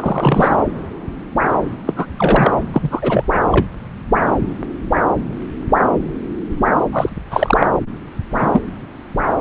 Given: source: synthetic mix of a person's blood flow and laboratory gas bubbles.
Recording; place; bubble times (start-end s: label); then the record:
Doppler ultrasound of blood flow; subclavian vein
0.00-0.56 s: bubbles
1.86-2.06 s: bubbles
2.17-2.53 s: bubbles
2.73-3.25 s: bubbles
3.51-3.66 s: bubbles
6.92-7.09 s: bubbles
7.30-7.67 s: bubbles
8.30-8.64 s: bubbles
From the record:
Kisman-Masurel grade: 233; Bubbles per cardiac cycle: several, 3 to 8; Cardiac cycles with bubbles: 50 to 99%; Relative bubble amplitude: loud (0.450 to 0.775); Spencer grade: 3 (all of the cardiac periods contain showers or single bubble signals, but not dominating or overriding the cardiac motion signals); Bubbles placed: anywhere in the cardiac cycle